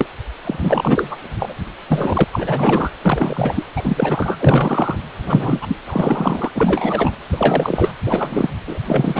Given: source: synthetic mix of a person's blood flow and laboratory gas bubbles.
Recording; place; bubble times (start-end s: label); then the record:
Doppler ultrasound of blood flow; precordium
0.00-0.07 s: bubbles
0.45-1.17 s: bubbles
1.39-1.55 s: bubbles
1.88-2.24 s: bubbles
2.31-2.91 s: bubbles
3.02-3.64 s: bubbles
3.76-4.36 s: bubbles
4.39-4.98 s: bubbles
5.25-5.77 s: bubbles
5.86-6.51 s: bubbles
6.54-7.19 s: bubbles
7.31-7.92 s: bubbles
8.05-8.50 s: bubbles
8.67-8.79 s: bubbles
8.85-9.20 s: bubbles
From the record:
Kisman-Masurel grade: 343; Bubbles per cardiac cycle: rolling drumbeat, 9 or more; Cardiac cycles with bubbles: 100%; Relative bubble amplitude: loud (0.450 to 0.775); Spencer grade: 3 (all of the cardiac periods contain showers or single bubble signals, but not dominating or overriding the cardiac motion signals); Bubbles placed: anywhere in the cardiac cycle